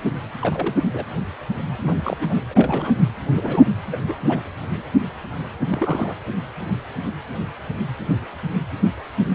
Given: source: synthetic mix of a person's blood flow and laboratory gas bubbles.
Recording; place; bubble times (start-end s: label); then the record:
Doppler ultrasound of blood flow; precordium
0.41-0.75 s: bubbles
0.92-1.05 s: bubbles
1.81-2.43 s: bubbles
2.50-2.98 s: bubbles
3.29-3.67 s: bubbles
3.91-3.98 s: bubbles
4.08-4.15 s: bubbles
4.21-4.42 s: bubbles
5.68-6.15 s: bubbles
From the record:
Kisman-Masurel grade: 221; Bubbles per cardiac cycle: several, 3 to 8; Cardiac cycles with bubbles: 10 to 50%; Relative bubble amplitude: barely perceptible (0.100 to 0.250); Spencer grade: 2 (many but less than half of the cardiac periods contain bubble signals, singularly or in groups); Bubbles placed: anywhere in the cardiac cycle